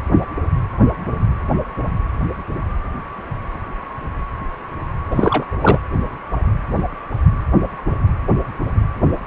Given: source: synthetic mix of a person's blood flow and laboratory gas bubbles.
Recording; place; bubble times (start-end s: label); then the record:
Doppler ultrasound of blood flow; precordium
5.10-5.45 s: bubbles
5.60-5.80 s: bubbles
From the record:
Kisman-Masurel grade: 213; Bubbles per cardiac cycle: several, 3 to 8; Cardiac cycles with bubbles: 1 to 10%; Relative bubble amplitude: loud (0.450 to 0.775); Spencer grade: 1 (occasional bubble signal discernible with the cardiac motion signal, with majority of cardiac periods free of bubbles); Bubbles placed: anywhere in the cardiac cycle